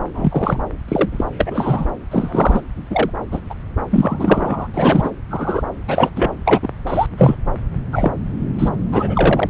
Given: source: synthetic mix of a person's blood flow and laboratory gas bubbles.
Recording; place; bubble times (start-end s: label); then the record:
Doppler ultrasound of blood flow; subclavian vein
0.14-0.60 s: bubbles
0.88-1.09 s: bubbles
1.12-1.25 s: bubbles
1.38-1.87 s: bubbles
2.11-2.61 s: bubbles
2.90-3.10 s: bubbles
3.31-3.40 s: bubbles
3.50-3.54 s: bubbles
3.92-4.68 s: bubbles
4.74-5.12 s: bubbles
5.31-5.63 s: bubbles
5.87-6.10 s: bubbles
6.15-6.32 s: bubbles
6.45-6.69 s: bubbles
6.87-7.06 s: bubbles
7.18-7.36 s: bubbles
7.92-8.14 s: bubbles
8.58-8.69 s: bubbles
8.91-9.49 s: bubbles
From the record:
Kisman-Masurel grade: 243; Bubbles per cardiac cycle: several, 3 to 8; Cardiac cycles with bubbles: 100%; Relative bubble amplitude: loud (0.450 to 0.775); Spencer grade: 3 (all of the cardiac periods contain showers or single bubble signals, but not dominating or overriding the cardiac motion signals); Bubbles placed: anywhere in the cardiac cycle